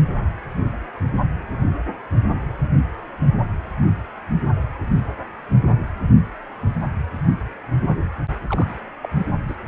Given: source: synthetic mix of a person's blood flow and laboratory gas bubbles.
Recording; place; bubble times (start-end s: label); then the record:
Doppler ultrasound of blood flow; precordium
8.46-8.68 s: bubbles
9.03-9.09 s: bubbles
9.14-9.19 s: bubbles
9.48-9.56 s: bubbles
From the record:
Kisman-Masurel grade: 211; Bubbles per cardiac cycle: several, 3 to 8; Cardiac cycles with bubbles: 1 to 10%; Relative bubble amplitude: barely perceptible (0.100 to 0.250); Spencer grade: 1 (occasional bubble signal discernible with the cardiac motion signal, with majority of cardiac periods free of bubbles); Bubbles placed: anywhere in the cardiac cycle